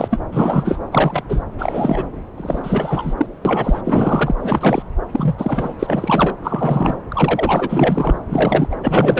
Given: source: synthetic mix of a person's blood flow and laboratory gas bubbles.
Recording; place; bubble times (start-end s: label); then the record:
Doppler ultrasound of blood flow; subclavian vein
0.00-0.21 s: bubbles
0.32-0.78 s: bubbles
0.92-1.22 s: bubbles
1.28-1.43 s: bubbles
1.58-2.12 s: bubbles
2.38-3.14 s: bubbles
3.17-3.27 s: bubbles
3.45-3.81 s: bubbles
3.84-4.35 s: bubbles
4.39-4.82 s: bubbles
5.12-5.34 s: bubbles
5.38-5.73 s: bubbles
5.79-6.36 s: bubbles
6.43-6.99 s: bubbles
7.10-8.19 s: bubbles
8.29-8.68 s: bubbles
8.71-8.76 s: bubbles
8.81-9.20 s: bubbles
From the record:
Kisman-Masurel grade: 343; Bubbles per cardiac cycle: rolling drumbeat, 9 or more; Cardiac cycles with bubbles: 100%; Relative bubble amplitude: loud (0.450 to 0.775); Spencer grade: 3 (all of the cardiac periods contain showers or single bubble signals, but not dominating or overriding the cardiac motion signals); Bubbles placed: anywhere in the cardiac cycle